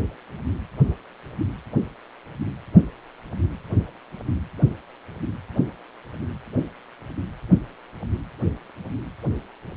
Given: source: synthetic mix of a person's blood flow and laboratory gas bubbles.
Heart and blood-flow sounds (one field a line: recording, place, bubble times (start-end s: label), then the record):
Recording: Doppler ultrasound of blood flow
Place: precordium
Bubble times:
no bubbles
From the record:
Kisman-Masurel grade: 000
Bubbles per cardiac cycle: 0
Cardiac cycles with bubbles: 0%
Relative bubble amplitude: no bubbles discernible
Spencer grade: 0 (complete lack of bubble signals)